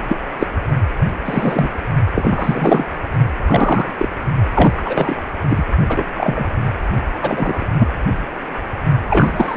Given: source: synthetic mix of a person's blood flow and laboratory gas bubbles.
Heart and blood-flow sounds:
Doppler ultrasound of blood flow; precordium
0.09-0.17 s: bubbles
0.39-0.46 s: bubbles
1.24-1.69 s: bubbles
2.15-2.85 s: bubbles
3.45-3.92 s: bubbles
3.98-4.08 s: bubbles
4.54-4.72 s: bubbles
4.76-4.83 s: bubbles
4.85-5.15 s: bubbles
5.48-5.64 s: bubbles
5.88-6.04 s: bubbles
6.14-6.46 s: bubbles
7.21-7.65 s: bubbles
7.79-7.88 s: bubbles
9.09-9.57 s: bubbles
From the record:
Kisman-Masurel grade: 243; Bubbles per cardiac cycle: several, 3 to 8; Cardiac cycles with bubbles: 100%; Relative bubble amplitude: loud (0.450 to 0.775); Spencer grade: 3 (all of the cardiac periods contain showers or single bubble signals, but not dominating or overriding the cardiac motion signals); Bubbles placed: only in the low amplitude regions of the cardiac cycle

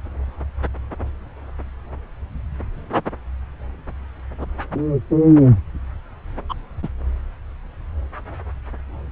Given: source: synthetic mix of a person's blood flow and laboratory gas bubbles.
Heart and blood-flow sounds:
Doppler ultrasound of blood flow; subclavian vein
6.49-6.54 s: bubbles
6.82-6.88 s: bubbles
From the record:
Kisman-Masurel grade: 112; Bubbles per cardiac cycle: 1 to 2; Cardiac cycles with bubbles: 1 to 10%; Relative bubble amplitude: moderate (0.250 to 0.450); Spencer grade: 1 (occasional bubble signal discernible with the cardiac motion signal, with majority of cardiac periods free of bubbles); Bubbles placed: anywhere in the cardiac cycle

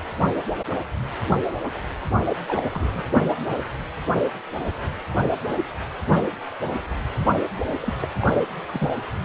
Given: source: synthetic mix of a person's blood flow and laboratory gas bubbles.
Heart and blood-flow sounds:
Doppler ultrasound of blood flow; precordium
2.48-3.03 s: bubbles
7.64-7.72 s: bubbles
7.80-7.93 s: bubbles
8.00-8.08 s: bubbles
8.21-8.45 s: bubbles
8.68-8.94 s: bubbles
From the record:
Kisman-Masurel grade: 222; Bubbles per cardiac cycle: several, 3 to 8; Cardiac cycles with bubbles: 10 to 50%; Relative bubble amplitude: moderate (0.250 to 0.450); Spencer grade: 2 (many but less than half of the cardiac periods contain bubble signals, singularly or in groups); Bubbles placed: anywhere in the cardiac cycle

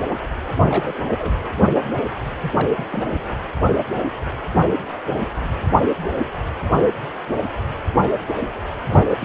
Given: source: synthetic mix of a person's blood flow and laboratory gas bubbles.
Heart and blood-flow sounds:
Doppler ultrasound of blood flow; precordium
0.61-0.94 s: bubbles
1.08-1.12 s: bubbles
1.19-1.35 s: bubbles
2.41-2.86 s: bubbles
2.88-3.05 s: bubbles
3.09-3.18 s: bubbles
8.89-9.25 s: bubbles
From the record:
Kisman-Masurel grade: 221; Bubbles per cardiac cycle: several, 3 to 8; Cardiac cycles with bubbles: 10 to 50%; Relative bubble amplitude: barely perceptible (0.100 to 0.250); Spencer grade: 2 (many but less than half of the cardiac periods contain bubble signals, singularly or in groups); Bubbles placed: anywhere in the cardiac cycle

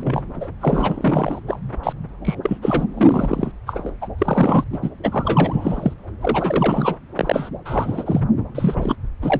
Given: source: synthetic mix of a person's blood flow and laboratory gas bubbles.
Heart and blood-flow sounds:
Doppler ultrasound of blood flow; subclavian vein
0.00-0.21 s: bubbles
0.41-0.48 s: bubbles
0.61-1.40 s: bubbles
1.47-1.59 s: bubbles
1.83-1.93 s: bubbles
2.25-2.35 s: bubbles
2.43-2.58 s: bubbles
2.62-2.85 s: bubbles
2.97-3.52 s: bubbles
3.67-3.91 s: bubbles
4.01-4.08 s: bubbles
4.18-4.64 s: bubbles
4.72-4.90 s: bubbles
5.03-5.94 s: bubbles
6.21-6.96 s: bubbles
7.15-7.49 s: bubbles
7.65-8.21 s: bubbles
8.54-8.96 s: bubbles
9.21-9.40 s: bubbles
From the record:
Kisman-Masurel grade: 342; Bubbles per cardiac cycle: rolling drumbeat, 9 or more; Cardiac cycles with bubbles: 100%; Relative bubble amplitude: moderate (0.250 to 0.450); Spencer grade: 3 (all of the cardiac periods contain showers or single bubble signals, but not dominating or overriding the cardiac motion signals); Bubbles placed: anywhere in the cardiac cycle

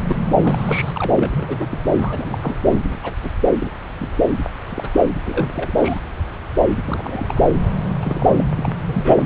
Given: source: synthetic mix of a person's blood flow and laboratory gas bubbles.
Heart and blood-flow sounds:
Doppler ultrasound of blood flow; subclavian vein
0.09-0.16 s: bubbles
0.41-1.12 s: bubbles
1.16-1.67 s: bubbles
1.70-1.78 s: bubbles
2.00-2.55 s: bubbles
2.65-2.80 s: bubbles
2.84-3.00 s: bubbles
3.02-3.14 s: bubbles
3.23-3.29 s: bubbles
3.59-3.69 s: bubbles
3.99-4.09 s: bubbles
4.69-4.91 s: bubbles
5.26-5.73 s: bubbles
5.78-5.99 s: bubbles
6.85-7.53 s: bubbles
7.88-7.95 s: bubbles
8.00-8.44 s: bubbles
8.56-8.73 s: bubbles
8.85-9.25 s: bubbles
From the record:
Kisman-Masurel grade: 232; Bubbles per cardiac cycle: several, 3 to 8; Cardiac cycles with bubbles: 50 to 99%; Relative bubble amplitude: moderate (0.250 to 0.450); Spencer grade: 3 (all of the cardiac periods contain showers or single bubble signals, but not dominating or overriding the cardiac motion signals); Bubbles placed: anywhere in the cardiac cycle

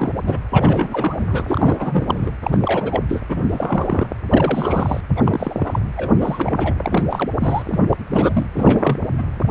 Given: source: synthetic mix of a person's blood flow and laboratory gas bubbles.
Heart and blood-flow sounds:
Doppler ultrasound of blood flow; precordium
0.00-0.14 s: bubbles
0.27-0.40 s: bubbles
0.50-2.31 s: bubbles
2.43-2.57 s: bubbles
2.62-3.03 s: bubbles
3.08-3.23 s: bubbles
3.29-4.06 s: bubbles
4.29-5.00 s: bubbles
5.17-5.21 s: bubbles
5.25-5.79 s: bubbles
5.96-6.11 s: bubbles
6.15-6.73 s: bubbles
6.83-7.04 s: bubbles
7.09-7.29 s: bubbles
7.39-7.62 s: bubbles
7.65-7.79 s: bubbles
7.89-7.97 s: bubbles
8.07-8.46 s: bubbles
8.54-8.97 s: bubbles
9.18-9.23 s: bubbles
9.40-9.51 s: bubbles
From the record:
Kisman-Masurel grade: 342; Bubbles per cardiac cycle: rolling drumbeat, 9 or more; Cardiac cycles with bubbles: 100%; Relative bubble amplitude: moderate (0.250 to 0.450); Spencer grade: 3 (all of the cardiac periods contain showers or single bubble signals, but not dominating or overriding the cardiac motion signals); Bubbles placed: anywhere in the cardiac cycle

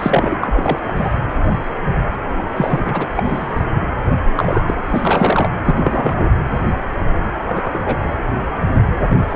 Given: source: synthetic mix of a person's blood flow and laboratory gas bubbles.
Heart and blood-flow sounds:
Doppler ultrasound of blood flow; precordium
0.00-0.36 s: bubbles
0.42-0.79 s: bubbles
0.83-1.16 s: bubbles
2.37-2.42 s: bubbles
2.56-3.08 s: bubbles
3.17-3.65 s: bubbles
4.35-4.75 s: bubbles
4.90-5.50 s: bubbles
5.63-6.31 s: bubbles
7.46-8.12 s: bubbles
9.10-9.19 s: bubbles
9.29-9.36 s: bubbles
From the record:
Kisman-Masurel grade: 233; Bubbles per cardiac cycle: several, 3 to 8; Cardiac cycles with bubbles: 50 to 99%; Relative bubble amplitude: loud (0.450 to 0.775); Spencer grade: 3 (all of the cardiac periods contain showers or single bubble signals, but not dominating or overriding the cardiac motion signals); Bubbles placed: anywhere in the cardiac cycle

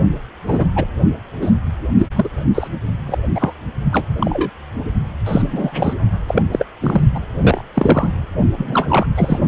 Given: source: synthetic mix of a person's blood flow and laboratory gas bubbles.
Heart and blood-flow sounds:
Doppler ultrasound of blood flow; precordium
0.46-0.66 s: bubbles
0.76-0.84 s: bubbles
1.42-1.51 s: bubbles
1.98-2.08 s: bubbles
2.16-2.29 s: bubbles
2.54-2.68 s: bubbles
3.06-3.18 s: bubbles
3.35-3.53 s: bubbles
3.92-4.06 s: bubbles
4.20-4.50 s: bubbles
5.26-5.93 s: bubbles
6.27-6.42 s: bubbles
6.51-6.66 s: bubbles
6.80-7.01 s: bubbles
7.15-7.20 s: bubbles
7.42-7.61 s: bubbles
7.74-8.13 s: bubbles
8.57-9.06 s: bubbles
9.16-9.39 s: bubbles
From the record:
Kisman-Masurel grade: 233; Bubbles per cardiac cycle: several, 3 to 8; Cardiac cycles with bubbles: 50 to 99%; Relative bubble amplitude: loud (0.450 to 0.775); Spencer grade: 3 (all of the cardiac periods contain showers or single bubble signals, but not dominating or overriding the cardiac motion signals); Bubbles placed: only in the low amplitude regions of the cardiac cycle

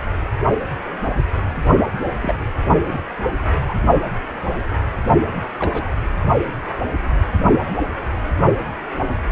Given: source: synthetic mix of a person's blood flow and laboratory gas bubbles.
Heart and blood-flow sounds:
Doppler ultrasound of blood flow; precordium
2.21-2.35 s: bubbles
2.88-3.00 s: bubbles
3.61-3.75 s: bubbles
5.59-5.88 s: bubbles
From the record:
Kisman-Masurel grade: 122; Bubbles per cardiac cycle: 1 to 2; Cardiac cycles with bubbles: 10 to 50%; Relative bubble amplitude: moderate (0.250 to 0.450); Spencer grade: 2 (many but less than half of the cardiac periods contain bubble signals, singularly or in groups); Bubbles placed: only in the low amplitude regions of the cardiac cycle

